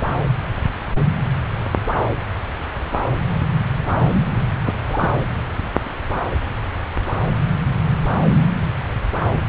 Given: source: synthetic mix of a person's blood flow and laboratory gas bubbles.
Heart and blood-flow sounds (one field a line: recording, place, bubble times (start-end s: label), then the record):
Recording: Doppler ultrasound of blood flow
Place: subclavian vein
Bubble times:
4.14-4.19 s: bubbles
4.65-5.12 s: bubbles
From the record:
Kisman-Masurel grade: 212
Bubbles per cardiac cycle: several, 3 to 8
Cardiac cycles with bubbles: 1 to 10%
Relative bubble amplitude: moderate (0.250 to 0.450)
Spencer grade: 1 (occasional bubble signal discernible with the cardiac motion signal, with majority of cardiac periods free of bubbles)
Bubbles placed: anywhere in the cardiac cycle